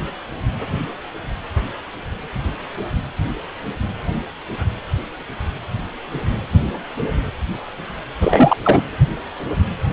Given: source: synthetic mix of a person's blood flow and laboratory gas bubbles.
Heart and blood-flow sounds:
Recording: Doppler ultrasound of blood flow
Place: precordium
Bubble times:
8.20-8.57 s: bubbles
8.64-8.83 s: bubbles
From the record:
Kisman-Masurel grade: 213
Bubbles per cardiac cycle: several, 3 to 8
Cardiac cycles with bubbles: 1 to 10%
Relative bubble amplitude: loud (0.450 to 0.775)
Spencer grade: 1 (occasional bubble signal discernible with the cardiac motion signal, with majority of cardiac periods free of bubbles)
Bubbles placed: anywhere in the cardiac cycle

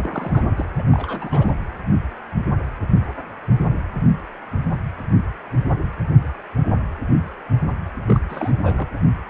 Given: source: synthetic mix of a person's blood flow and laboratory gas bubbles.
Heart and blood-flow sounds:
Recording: Doppler ultrasound of blood flow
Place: precordium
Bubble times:
0.00-0.43 s: bubbles
0.57-0.66 s: bubbles
0.78-0.82 s: bubbles
0.88-1.52 s: bubbles
8.06-8.21 s: bubbles
8.29-8.51 s: bubbles
8.63-8.88 s: bubbles
From the record:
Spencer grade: 2 (many but less than half of the cardiac periods contain bubble signals, singularly or in groups)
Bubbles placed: anywhere in the cardiac cycle

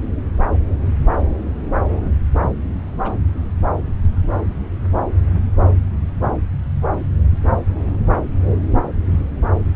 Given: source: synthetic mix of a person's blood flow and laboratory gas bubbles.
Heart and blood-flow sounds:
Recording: Doppler ultrasound of blood flow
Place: subclavian vein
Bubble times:
3.03-3.12 s: bubbles
From the record:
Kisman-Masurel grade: 111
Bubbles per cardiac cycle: 1 to 2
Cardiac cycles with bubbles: 1 to 10%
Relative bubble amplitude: barely perceptible (0.100 to 0.250)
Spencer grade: 1 (occasional bubble signal discernible with the cardiac motion signal, with majority of cardiac periods free of bubbles)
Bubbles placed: anywhere in the cardiac cycle

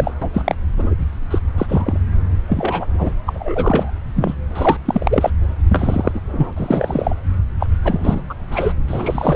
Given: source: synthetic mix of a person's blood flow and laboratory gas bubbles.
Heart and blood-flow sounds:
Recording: Doppler ultrasound of blood flow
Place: subclavian vein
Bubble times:
0.00-0.11 s: bubbles
0.21-0.29 s: bubbles
0.34-0.55 s: bubbles
0.76-0.94 s: bubbles
1.30-1.39 s: bubbles
1.57-1.99 s: bubbles
2.48-2.86 s: bubbles
2.93-3.14 s: bubbles
3.26-3.91 s: bubbles
4.15-4.35 s: bubbles
4.55-4.78 s: bubbles
4.85-5.30 s: bubbles
5.69-6.20 s: bubbles
6.32-6.53 s: bubbles
6.56-7.14 s: bubbles
7.60-7.66 s: bubbles
7.84-8.21 s: bubbles
8.29-8.35 s: bubbles
8.51-8.73 s: bubbles
8.88-9.36 s: bubbles
From the record:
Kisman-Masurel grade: 243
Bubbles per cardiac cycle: several, 3 to 8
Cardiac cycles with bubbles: 100%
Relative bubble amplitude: loud (0.450 to 0.775)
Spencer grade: 3 (all of the cardiac periods contain showers or single bubble signals, but not dominating or overriding the cardiac motion signals)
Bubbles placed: anywhere in the cardiac cycle

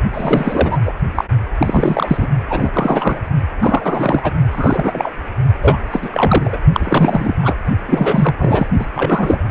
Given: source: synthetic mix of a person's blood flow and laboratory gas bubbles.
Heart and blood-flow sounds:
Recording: Doppler ultrasound of blood flow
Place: precordium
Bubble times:
0.14-0.79 s: bubbles
0.85-0.93 s: bubbles
1.15-1.25 s: bubbles
1.59-2.27 s: bubbles
2.50-2.70 s: bubbles
2.73-3.19 s: bubbles
3.60-4.33 s: bubbles
4.51-5.11 s: bubbles
5.62-5.79 s: bubbles
5.91-6.58 s: bubbles
6.72-7.35 s: bubbles
7.42-7.54 s: bubbles
7.88-8.35 s: bubbles
8.38-8.67 s: bubbles
8.79-8.86 s: bubbles
8.95-9.38 s: bubbles
From the record:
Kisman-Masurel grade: 333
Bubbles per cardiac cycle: rolling drumbeat, 9 or more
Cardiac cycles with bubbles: 50 to 99%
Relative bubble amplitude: loud (0.450 to 0.775)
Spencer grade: 3 (all of the cardiac periods contain showers or single bubble signals, but not dominating or overriding the cardiac motion signals)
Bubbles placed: only in the low amplitude regions of the cardiac cycle

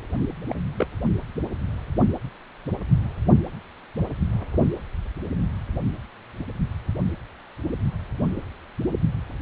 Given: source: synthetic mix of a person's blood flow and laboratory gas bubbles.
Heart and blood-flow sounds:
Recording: Doppler ultrasound of blood flow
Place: precordium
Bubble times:
0.48-0.57 s: bubbles
0.78-0.86 s: bubbles
From the record:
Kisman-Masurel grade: 121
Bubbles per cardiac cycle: 1 to 2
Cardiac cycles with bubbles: 10 to 50%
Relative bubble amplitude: barely perceptible (0.100 to 0.250)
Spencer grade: 2 (many but less than half of the cardiac periods contain bubble signals, singularly or in groups)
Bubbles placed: anywhere in the cardiac cycle

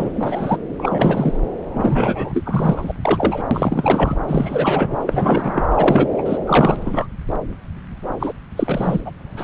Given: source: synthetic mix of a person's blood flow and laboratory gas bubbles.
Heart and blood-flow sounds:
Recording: Doppler ultrasound of blood flow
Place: subclavian vein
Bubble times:
0.00-0.57 s: bubbles
0.79-1.40 s: bubbles
1.74-2.93 s: bubbles
3.01-3.42 s: bubbles
3.51-4.16 s: bubbles
4.27-4.96 s: bubbles
5.06-5.67 s: bubbles
5.74-6.08 s: bubbles
6.17-6.22 s: bubbles
6.25-6.38 s: bubbles
6.46-7.07 s: bubbles
8.20-8.32 s: bubbles
8.56-9.00 s: bubbles
9.04-9.12 s: bubbles
9.37-9.44 s: bubbles
From the record:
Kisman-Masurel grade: 333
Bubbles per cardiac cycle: rolling drumbeat, 9 or more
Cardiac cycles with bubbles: 50 to 99%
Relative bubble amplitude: loud (0.450 to 0.775)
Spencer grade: 3 (all of the cardiac periods contain showers or single bubble signals, but not dominating or overriding the cardiac motion signals)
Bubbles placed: anywhere in the cardiac cycle

